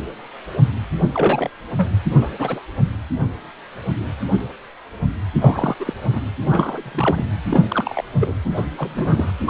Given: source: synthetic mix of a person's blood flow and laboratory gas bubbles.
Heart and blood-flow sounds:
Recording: Doppler ultrasound of blood flow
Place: precordium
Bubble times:
1.15-1.50 s: bubbles
1.76-1.91 s: bubbles
2.10-2.60 s: bubbles
5.40-5.75 s: bubbles
5.79-5.93 s: bubbles
6.08-6.22 s: bubbles
6.43-7.25 s: bubbles
7.50-8.04 s: bubbles
8.21-8.34 s: bubbles
8.44-8.66 s: bubbles
8.77-9.32 s: bubbles
9.45-9.50 s: bubbles
From the record:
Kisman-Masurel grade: 232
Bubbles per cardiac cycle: several, 3 to 8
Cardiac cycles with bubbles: 50 to 99%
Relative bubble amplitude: moderate (0.250 to 0.450)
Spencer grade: 3 (all of the cardiac periods contain showers or single bubble signals, but not dominating or overriding the cardiac motion signals)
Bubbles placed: anywhere in the cardiac cycle

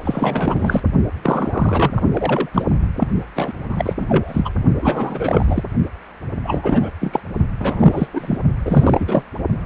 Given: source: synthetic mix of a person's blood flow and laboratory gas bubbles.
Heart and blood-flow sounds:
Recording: Doppler ultrasound of blood flow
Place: precordium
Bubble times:
0.04-0.82 s: bubbles
1.23-2.02 s: bubbles
2.11-2.49 s: bubbles
2.53-2.65 s: bubbles
2.96-3.07 s: bubbles
3.35-3.53 s: bubbles
3.69-4.06 s: bubbles
4.08-4.50 s: bubbles
4.82-5.62 s: bubbles
6.44-6.91 s: bubbles
7.00-7.20 s: bubbles
7.60-8.08 s: bubbles
8.13-8.38 s: bubbles
8.65-9.23 s: bubbles
From the record:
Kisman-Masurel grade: 333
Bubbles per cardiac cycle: rolling drumbeat, 9 or more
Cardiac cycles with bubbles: 50 to 99%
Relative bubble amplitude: loud (0.450 to 0.775)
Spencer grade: 3 (all of the cardiac periods contain showers or single bubble signals, but not dominating or overriding the cardiac motion signals)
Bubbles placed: only in the low amplitude regions of the cardiac cycle

